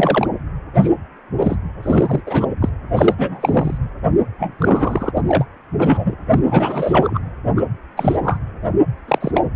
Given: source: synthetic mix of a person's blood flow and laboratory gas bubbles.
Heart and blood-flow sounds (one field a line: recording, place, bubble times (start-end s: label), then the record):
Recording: Doppler ultrasound of blood flow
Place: precordium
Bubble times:
0.00-0.28 s: bubbles
0.74-0.90 s: bubbles
1.39-1.56 s: bubbles
1.82-2.21 s: bubbles
2.26-2.46 s: bubbles
2.61-2.70 s: bubbles
2.96-3.15 s: bubbles
3.18-3.79 s: bubbles
4.38-5.11 s: bubbles
5.15-5.22 s: bubbles
5.27-5.44 s: bubbles
5.78-6.17 s: bubbles
6.30-6.39 s: bubbles
6.45-7.21 s: bubbles
7.56-7.61 s: bubbles
7.96-8.17 s: bubbles
8.23-8.39 s: bubbles
9.08-9.41 s: bubbles
From the record:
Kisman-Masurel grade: 243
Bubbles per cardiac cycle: several, 3 to 8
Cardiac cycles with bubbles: 100%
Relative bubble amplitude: loud (0.450 to 0.775)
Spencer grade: 3 (all of the cardiac periods contain showers or single bubble signals, but not dominating or overriding the cardiac motion signals)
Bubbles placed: anywhere in the cardiac cycle